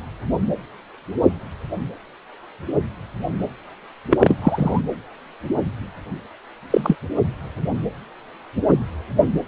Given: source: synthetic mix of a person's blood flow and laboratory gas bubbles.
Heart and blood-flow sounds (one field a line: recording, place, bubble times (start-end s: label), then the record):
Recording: Doppler ultrasound of blood flow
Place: precordium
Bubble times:
4.10-4.17 s: bubbles
4.20-4.38 s: bubbles
4.42-4.81 s: bubbles
6.70-6.96 s: bubbles
From the record:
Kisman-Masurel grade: 123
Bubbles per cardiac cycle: 1 to 2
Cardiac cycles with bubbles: 10 to 50%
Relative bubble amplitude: loud (0.450 to 0.775)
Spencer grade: 2 (many but less than half of the cardiac periods contain bubble signals, singularly or in groups)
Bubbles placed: anywhere in the cardiac cycle